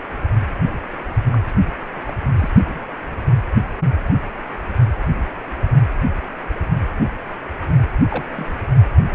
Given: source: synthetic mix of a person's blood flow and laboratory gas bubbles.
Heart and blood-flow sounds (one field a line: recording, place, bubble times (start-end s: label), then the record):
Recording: Doppler ultrasound of blood flow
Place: precordium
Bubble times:
1.32-1.38 s: bubbles
1.46-1.54 s: bubbles
2.07-2.15 s: bubbles
2.38-2.49 s: bubbles
2.65-2.79 s: bubbles
8.08-8.25 s: bubbles
8.36-8.54 s: bubbles
9.09-9.15 s: bubbles
From the record:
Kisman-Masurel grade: 121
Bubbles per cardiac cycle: 1 to 2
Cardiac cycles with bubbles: 10 to 50%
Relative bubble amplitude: barely perceptible (0.100 to 0.250)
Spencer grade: 2 (many but less than half of the cardiac periods contain bubble signals, singularly or in groups)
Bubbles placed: only in the low amplitude regions of the cardiac cycle